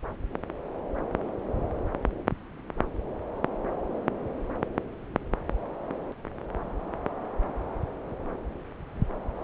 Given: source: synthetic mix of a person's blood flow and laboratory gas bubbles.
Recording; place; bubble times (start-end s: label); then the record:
Doppler ultrasound of blood flow; subclavian vein
no bubbles
From the record:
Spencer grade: 0 (complete lack of bubble signals)